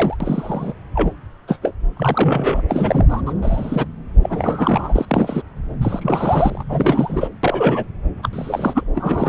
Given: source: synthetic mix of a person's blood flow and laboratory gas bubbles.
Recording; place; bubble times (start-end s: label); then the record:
Doppler ultrasound of blood flow; subclavian vein
0.00-0.17 s: bubbles
0.20-0.73 s: bubbles
0.94-1.12 s: bubbles
1.48-1.57 s: bubbles
1.62-1.73 s: bubbles
1.96-2.63 s: bubbles
2.69-3.21 s: bubbles
3.26-3.33 s: bubbles
3.42-3.85 s: bubbles
4.23-5.05 s: bubbles
5.08-5.43 s: bubbles
5.81-6.64 s: bubbles
6.69-7.28 s: bubbles
7.43-7.84 s: bubbles
8.22-8.29 s: bubbles
8.32-8.83 s: bubbles
8.95-9.29 s: bubbles
From the record:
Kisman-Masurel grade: 242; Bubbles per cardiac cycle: several, 3 to 8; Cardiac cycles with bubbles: 100%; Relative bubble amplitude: moderate (0.250 to 0.450); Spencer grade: 3 (all of the cardiac periods contain showers or single bubble signals, but not dominating or overriding the cardiac motion signals); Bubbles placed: anywhere in the cardiac cycle